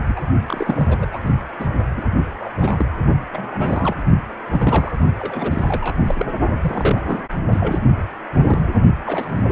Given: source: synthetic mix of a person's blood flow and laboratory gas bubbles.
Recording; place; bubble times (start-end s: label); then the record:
Doppler ultrasound of blood flow; precordium
0.05-0.21 s: bubbles
0.46-1.05 s: bubbles
1.11-1.20 s: bubbles
1.24-1.40 s: bubbles
1.59-1.68 s: bubbles
1.97-2.09 s: bubbles
2.40-2.54 s: bubbles
2.57-2.86 s: bubbles
3.31-4.03 s: bubbles
4.51-4.92 s: bubbles
5.19-6.00 s: bubbles
6.07-6.15 s: bubbles
6.18-6.26 s: bubbles
6.61-7.21 s: bubbles
7.52-7.79 s: bubbles
8.33-8.68 s: bubbles
9.06-9.52 s: bubbles
From the record:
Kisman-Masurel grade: 242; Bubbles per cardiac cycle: several, 3 to 8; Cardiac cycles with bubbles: 100%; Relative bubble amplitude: moderate (0.250 to 0.450); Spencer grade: 3 (all of the cardiac periods contain showers or single bubble signals, but not dominating or overriding the cardiac motion signals); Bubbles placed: only in the low amplitude regions of the cardiac cycle